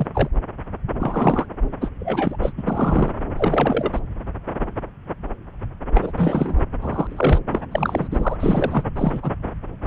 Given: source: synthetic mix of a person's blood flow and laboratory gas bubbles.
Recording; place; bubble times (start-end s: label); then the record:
Doppler ultrasound of blood flow; subclavian vein
0.00-0.07 s: bubbles
0.14-0.29 s: bubbles
0.99-1.46 s: bubbles
1.81-1.89 s: bubbles
1.99-2.37 s: bubbles
2.42-2.52 s: bubbles
2.57-2.63 s: bubbles
2.67-3.13 s: bubbles
3.37-4.00 s: bubbles
5.94-6.12 s: bubbles
6.17-6.62 s: bubbles
6.81-7.07 s: bubbles
7.09-7.40 s: bubbles
7.50-7.62 s: bubbles
7.71-8.09 s: bubbles
8.11-8.36 s: bubbles
8.40-8.84 s: bubbles
8.96-9.31 s: bubbles
From the record:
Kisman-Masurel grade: 233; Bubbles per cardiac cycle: several, 3 to 8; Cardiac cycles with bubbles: 50 to 99%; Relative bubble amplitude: loud (0.450 to 0.775); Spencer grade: 3 (all of the cardiac periods contain showers or single bubble signals, but not dominating or overriding the cardiac motion signals); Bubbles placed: anywhere in the cardiac cycle